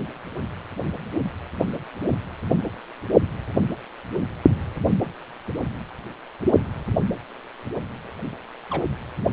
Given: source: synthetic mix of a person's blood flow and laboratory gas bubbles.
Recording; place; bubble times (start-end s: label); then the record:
Doppler ultrasound of blood flow; precordium
8.70-8.83 s: bubbles
From the record:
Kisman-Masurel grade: 111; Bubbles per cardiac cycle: 1 to 2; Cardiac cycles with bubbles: 1 to 10%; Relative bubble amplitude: barely perceptible (0.100 to 0.250); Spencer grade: 1 (occasional bubble signal discernible with the cardiac motion signal, with majority of cardiac periods free of bubbles); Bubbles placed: anywhere in the cardiac cycle